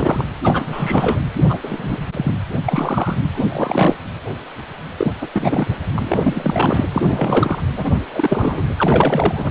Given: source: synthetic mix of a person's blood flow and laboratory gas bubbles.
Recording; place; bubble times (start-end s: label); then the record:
Doppler ultrasound of blood flow; precordium
0.00-0.25 s: bubbles
0.44-1.19 s: bubbles
1.48-1.58 s: bubbles
1.63-1.98 s: bubbles
2.12-2.39 s: bubbles
2.66-3.17 s: bubbles
3.32-3.96 s: bubbles
4.97-5.12 s: bubbles
5.21-5.28 s: bubbles
5.33-5.67 s: bubbles
5.94-6.83 s: bubbles
6.92-7.02 s: bubbles
7.08-7.62 s: bubbles
7.77-8.03 s: bubbles
8.12-8.63 s: bubbles
8.77-9.51 s: bubbles
From the record:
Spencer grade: 3 (all of the cardiac periods contain showers or single bubble signals, but not dominating or overriding the cardiac motion signals); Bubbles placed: anywhere in the cardiac cycle